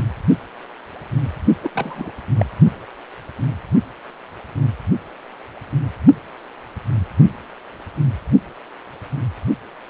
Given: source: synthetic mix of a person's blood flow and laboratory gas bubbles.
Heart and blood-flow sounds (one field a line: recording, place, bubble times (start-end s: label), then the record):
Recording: Doppler ultrasound of blood flow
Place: precordium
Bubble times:
1.62-1.69 s: bubbles
1.74-2.11 s: bubbles
2.38-2.46 s: bubbles
From the record:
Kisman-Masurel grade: 212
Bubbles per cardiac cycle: several, 3 to 8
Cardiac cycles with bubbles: 1 to 10%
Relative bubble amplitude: moderate (0.250 to 0.450)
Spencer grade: 1 (occasional bubble signal discernible with the cardiac motion signal, with majority of cardiac periods free of bubbles)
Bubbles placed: only in the low amplitude regions of the cardiac cycle